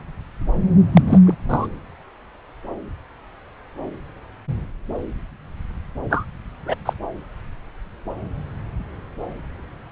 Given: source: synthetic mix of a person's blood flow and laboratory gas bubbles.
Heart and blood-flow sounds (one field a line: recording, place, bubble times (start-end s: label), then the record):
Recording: Doppler ultrasound of blood flow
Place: subclavian vein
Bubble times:
0.94-1.01 s: bubbles
1.06-1.20 s: bubbles
1.25-1.34 s: bubbles
1.49-1.68 s: bubbles
6.09-6.25 s: bubbles
6.66-6.75 s: bubbles
6.86-6.93 s: bubbles
From the record:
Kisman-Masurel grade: 213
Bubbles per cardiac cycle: several, 3 to 8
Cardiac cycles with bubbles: 1 to 10%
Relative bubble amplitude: loud (0.450 to 0.775)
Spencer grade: 1 (occasional bubble signal discernible with the cardiac motion signal, with majority of cardiac periods free of bubbles)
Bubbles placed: anywhere in the cardiac cycle